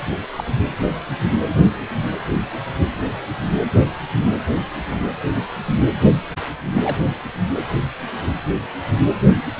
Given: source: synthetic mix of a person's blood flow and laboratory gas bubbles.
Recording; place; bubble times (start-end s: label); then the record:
Doppler ultrasound of blood flow; precordium
0.36-0.44 s: bubbles
6.73-7.04 s: bubbles
From the record:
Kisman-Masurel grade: 121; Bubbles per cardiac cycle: 1 to 2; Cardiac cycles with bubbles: 10 to 50%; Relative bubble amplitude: barely perceptible (0.100 to 0.250); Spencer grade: 2 (many but less than half of the cardiac periods contain bubble signals, singularly or in groups); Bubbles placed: anywhere in the cardiac cycle